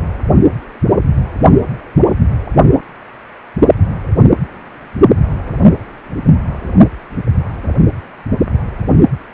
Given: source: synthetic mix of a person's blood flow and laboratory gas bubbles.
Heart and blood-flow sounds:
Doppler ultrasound of blood flow; precordium
no bubbles
From the record:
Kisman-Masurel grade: 000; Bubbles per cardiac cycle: 0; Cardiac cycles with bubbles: 0%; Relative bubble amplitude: no bubbles discernible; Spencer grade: 0 (complete lack of bubble signals)

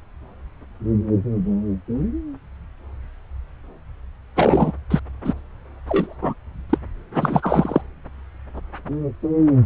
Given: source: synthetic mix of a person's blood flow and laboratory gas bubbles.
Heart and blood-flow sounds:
Doppler ultrasound of blood flow; subclavian vein
4.36-4.73 s: bubbles
4.90-5.00 s: bubbles
5.25-5.34 s: bubbles
5.87-6.16 s: bubbles
6.22-6.34 s: bubbles
6.70-6.78 s: bubbles
7.16-7.82 s: bubbles
From the record:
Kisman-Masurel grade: 223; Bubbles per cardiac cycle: several, 3 to 8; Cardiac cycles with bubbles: 10 to 50%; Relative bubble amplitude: loud (0.450 to 0.775); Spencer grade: 2 (many but less than half of the cardiac periods contain bubble signals, singularly or in groups); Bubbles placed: anywhere in the cardiac cycle

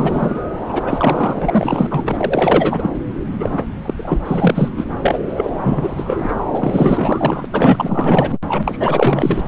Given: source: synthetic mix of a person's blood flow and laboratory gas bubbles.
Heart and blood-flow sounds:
Doppler ultrasound of blood flow; subclavian vein
0.00-0.41 s: bubbles
0.68-1.87 s: bubbles
1.90-2.90 s: bubbles
3.40-3.63 s: bubbles
3.85-3.94 s: bubbles
3.97-4.69 s: bubbles
4.77-4.85 s: bubbles
5.02-5.19 s: bubbles
5.25-5.50 s: bubbles
5.62-6.35 s: bubbles
6.54-7.46 s: bubbles
7.52-8.38 s: bubbles
8.48-9.43 s: bubbles
From the record:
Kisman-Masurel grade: 444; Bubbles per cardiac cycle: continuous sound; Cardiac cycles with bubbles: 100%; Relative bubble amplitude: maximal (0.775 to 0.999); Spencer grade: 4 (maximum detectable bubble signal sounding continuously throughout systole and diastole of every cardiac period, and overriding the amplitude of the normal cardiac signals); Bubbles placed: anywhere in the cardiac cycle

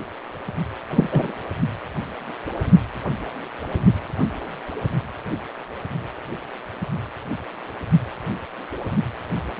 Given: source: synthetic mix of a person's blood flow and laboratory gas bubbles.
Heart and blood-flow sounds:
Doppler ultrasound of blood flow; precordium
0.90-1.08 s: bubbles
1.11-1.32 s: bubbles
From the record:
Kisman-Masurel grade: 213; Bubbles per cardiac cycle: several, 3 to 8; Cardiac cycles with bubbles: 1 to 10%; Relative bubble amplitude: loud (0.450 to 0.775); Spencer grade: 1 (occasional bubble signal discernible with the cardiac motion signal, with majority of cardiac periods free of bubbles); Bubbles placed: only in the low amplitude regions of the cardiac cycle

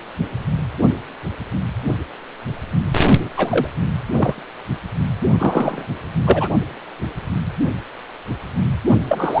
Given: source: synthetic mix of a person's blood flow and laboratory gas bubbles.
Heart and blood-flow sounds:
Doppler ultrasound of blood flow; precordium
3.36-3.68 s: bubbles
4.13-4.43 s: bubbles
5.38-5.86 s: bubbles
6.20-6.48 s: bubbles
9.09-9.40 s: bubbles
From the record:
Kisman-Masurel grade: 223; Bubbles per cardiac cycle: several, 3 to 8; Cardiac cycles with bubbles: 10 to 50%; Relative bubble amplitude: loud (0.450 to 0.775); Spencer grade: 2 (many but less than half of the cardiac periods contain bubble signals, singularly or in groups); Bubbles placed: only in the low amplitude regions of the cardiac cycle

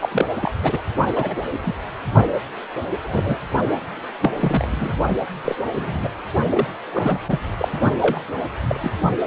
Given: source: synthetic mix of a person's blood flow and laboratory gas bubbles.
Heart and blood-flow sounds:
Doppler ultrasound of blood flow; precordium
0.00-0.09 s: bubbles
0.11-0.25 s: bubbles
0.36-0.52 s: bubbles
0.62-0.82 s: bubbles
1.15-1.36 s: bubbles
1.61-1.75 s: bubbles
3.03-3.38 s: bubbles
4.21-4.32 s: bubbles
4.40-4.92 s: bubbles
5.44-5.55 s: bubbles
5.75-6.08 s: bubbles
6.50-6.67 s: bubbles
6.91-7.20 s: bubbles
7.26-7.39 s: bubbles
7.58-7.68 s: bubbles
7.99-8.21 s: bubbles
8.67-8.91 s: bubbles
From the record:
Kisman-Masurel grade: 242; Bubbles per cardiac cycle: several, 3 to 8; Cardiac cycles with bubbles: 100%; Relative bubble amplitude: moderate (0.250 to 0.450); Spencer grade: 3 (all of the cardiac periods contain showers or single bubble signals, but not dominating or overriding the cardiac motion signals); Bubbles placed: only in the low amplitude regions of the cardiac cycle

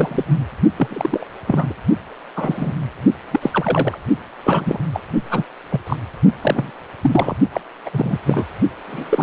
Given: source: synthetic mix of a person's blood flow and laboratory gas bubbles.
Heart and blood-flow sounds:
Doppler ultrasound of blood flow; precordium
0.00-0.25 s: bubbles
0.77-1.27 s: bubbles
1.47-1.74 s: bubbles
2.36-2.74 s: bubbles
3.31-3.98 s: bubbles
4.43-4.80 s: bubbles
4.92-5.00 s: bubbles
5.30-5.44 s: bubbles
5.71-5.80 s: bubbles
5.87-5.96 s: bubbles
6.42-6.71 s: bubbles
7.01-7.35 s: bubbles
7.52-7.61 s: bubbles
7.85-7.90 s: bubbles
7.93-8.21 s: bubbles
8.27-8.45 s: bubbles
8.88-9.23 s: bubbles
From the record:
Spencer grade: 3 (all of the cardiac periods contain showers or single bubble signals, but not dominating or overriding the cardiac motion signals); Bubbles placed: only in the low amplitude regions of the cardiac cycle

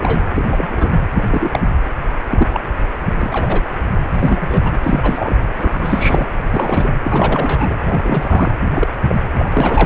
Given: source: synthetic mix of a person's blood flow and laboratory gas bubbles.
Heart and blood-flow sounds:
Doppler ultrasound of blood flow; precordium
0.00-0.29 s: bubbles
0.36-0.93 s: bubbles
1.14-1.24 s: bubbles
1.29-1.60 s: bubbles
2.29-2.48 s: bubbles
2.53-2.60 s: bubbles
3.21-3.63 s: bubbles
4.12-4.78 s: bubbles
4.82-5.35 s: bubbles
5.58-5.70 s: bubbles
5.73-6.27 s: bubbles
6.53-6.94 s: bubbles
7.04-7.74 s: bubbles
7.87-8.54 s: bubbles
8.61-8.88 s: bubbles
9.05-9.16 s: bubbles
9.38-9.50 s: bubbles
9.53-9.86 s: bubbles
From the record:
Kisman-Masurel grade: 243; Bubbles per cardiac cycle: several, 3 to 8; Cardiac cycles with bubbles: 100%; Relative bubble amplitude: loud (0.450 to 0.775); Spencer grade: 3 (all of the cardiac periods contain showers or single bubble signals, but not dominating or overriding the cardiac motion signals); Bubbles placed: anywhere in the cardiac cycle

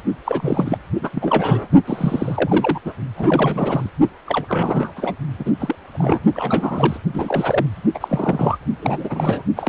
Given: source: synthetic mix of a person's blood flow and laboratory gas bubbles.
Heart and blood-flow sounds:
Doppler ultrasound of blood flow; precordium
0.25-0.77 s: bubbles
1.01-1.09 s: bubbles
1.12-1.68 s: bubbles
1.87-2.80 s: bubbles
2.84-2.93 s: bubbles
3.17-3.90 s: bubbles
4.26-4.92 s: bubbles
4.96-5.14 s: bubbles
5.38-5.52 s: bubbles
5.59-5.75 s: bubbles
5.92-6.19 s: bubbles
6.33-6.99 s: bubbles
7.13-7.66 s: bubbles
7.94-8.57 s: bubbles
8.81-9.42 s: bubbles
9.56-9.69 s: bubbles
From the record:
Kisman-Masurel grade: 342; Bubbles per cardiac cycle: rolling drumbeat, 9 or more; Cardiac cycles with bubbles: 100%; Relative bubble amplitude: moderate (0.250 to 0.450); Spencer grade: 3 (all of the cardiac periods contain showers or single bubble signals, but not dominating or overriding the cardiac motion signals); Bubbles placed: only in the low amplitude regions of the cardiac cycle

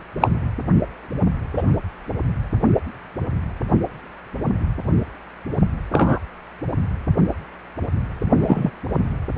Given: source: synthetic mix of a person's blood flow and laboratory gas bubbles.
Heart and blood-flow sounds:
Doppler ultrasound of blood flow; precordium
0.20-0.29 s: bubbles
1.56-1.63 s: bubbles
5.92-6.19 s: bubbles
8.40-8.70 s: bubbles
From the record:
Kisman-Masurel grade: 123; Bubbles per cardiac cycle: 1 to 2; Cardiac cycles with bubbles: 10 to 50%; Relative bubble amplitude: loud (0.450 to 0.775); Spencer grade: 2 (many but less than half of the cardiac periods contain bubble signals, singularly or in groups); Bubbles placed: anywhere in the cardiac cycle

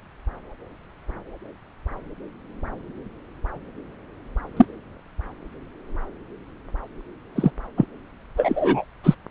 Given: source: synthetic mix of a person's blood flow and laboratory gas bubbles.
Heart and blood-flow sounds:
Doppler ultrasound of blood flow; subclavian vein
4.56-4.65 s: bubbles
7.35-7.51 s: bubbles
7.78-7.85 s: bubbles
8.37-8.85 s: bubbles
9.04-9.14 s: bubbles
From the record:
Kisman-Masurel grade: 123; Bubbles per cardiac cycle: 1 to 2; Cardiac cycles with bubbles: 10 to 50%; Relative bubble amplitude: loud (0.450 to 0.775); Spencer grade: 2 (many but less than half of the cardiac periods contain bubble signals, singularly or in groups); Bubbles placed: anywhere in the cardiac cycle

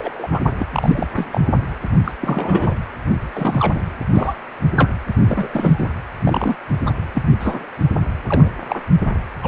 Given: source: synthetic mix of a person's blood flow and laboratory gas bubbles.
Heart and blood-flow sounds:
Doppler ultrasound of blood flow; precordium
0.00-0.28 s: bubbles
0.31-0.41 s: bubbles
0.59-0.66 s: bubbles
0.71-1.06 s: bubbles
1.16-1.27 s: bubbles
1.32-1.41 s: bubbles
2.04-2.12 s: bubbles
2.21-2.74 s: bubbles
3.34-3.81 s: bubbles
4.14-4.34 s: bubbles
4.76-4.90 s: bubbles
5.25-5.91 s: bubbles
6.21-6.56 s: bubbles
6.87-6.93 s: bubbles
7.13-7.22 s: bubbles
7.39-7.65 s: bubbles
8.27-8.52 s: bubbles
8.68-8.79 s: bubbles
9.42-9.48 s: bubbles
From the record:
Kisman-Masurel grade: 242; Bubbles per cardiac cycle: several, 3 to 8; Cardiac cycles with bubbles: 100%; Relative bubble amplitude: moderate (0.250 to 0.450); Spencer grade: 3 (all of the cardiac periods contain showers or single bubble signals, but not dominating or overriding the cardiac motion signals); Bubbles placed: anywhere in the cardiac cycle

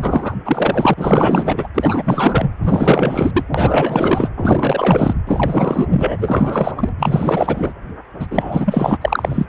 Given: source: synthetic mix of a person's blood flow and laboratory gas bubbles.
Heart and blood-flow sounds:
Doppler ultrasound of blood flow; precordium
0.01-0.35 s: bubbles
0.45-0.94 s: bubbles
0.97-1.68 s: bubbles
1.74-2.50 s: bubbles
2.63-3.31 s: bubbles
3.34-3.44 s: bubbles
3.54-4.29 s: bubbles
4.36-5.14 s: bubbles
5.27-6.89 s: bubbles
7.00-7.73 s: bubbles
8.20-8.27 s: bubbles
8.31-8.98 s: bubbles
9.01-9.46 s: bubbles
From the record:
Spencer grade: 4 (maximum detectable bubble signal sounding continuously throughout systole and diastole of every cardiac period, and overriding the amplitude of the normal cardiac signals); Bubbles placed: anywhere in the cardiac cycle

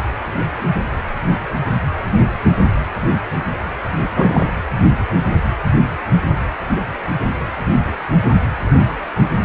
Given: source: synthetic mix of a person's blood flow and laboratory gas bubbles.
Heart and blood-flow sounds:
Doppler ultrasound of blood flow; precordium
4.16-4.51 s: bubbles
From the record:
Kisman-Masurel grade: 212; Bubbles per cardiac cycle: several, 3 to 8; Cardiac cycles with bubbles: 1 to 10%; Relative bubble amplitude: moderate (0.250 to 0.450); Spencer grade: 1 (occasional bubble signal discernible with the cardiac motion signal, with majority of cardiac periods free of bubbles); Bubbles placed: anywhere in the cardiac cycle

